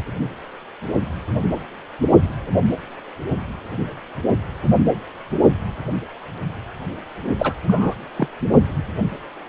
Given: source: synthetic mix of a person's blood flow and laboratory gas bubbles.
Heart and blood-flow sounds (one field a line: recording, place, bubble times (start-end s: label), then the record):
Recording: Doppler ultrasound of blood flow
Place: precordium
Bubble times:
7.38-7.54 s: bubbles
7.67-7.94 s: bubbles
8.16-8.29 s: bubbles
From the record:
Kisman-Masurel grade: 222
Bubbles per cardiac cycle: several, 3 to 8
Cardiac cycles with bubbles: 10 to 50%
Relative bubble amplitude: moderate (0.250 to 0.450)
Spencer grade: 2 (many but less than half of the cardiac periods contain bubble signals, singularly or in groups)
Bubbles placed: only in the low amplitude regions of the cardiac cycle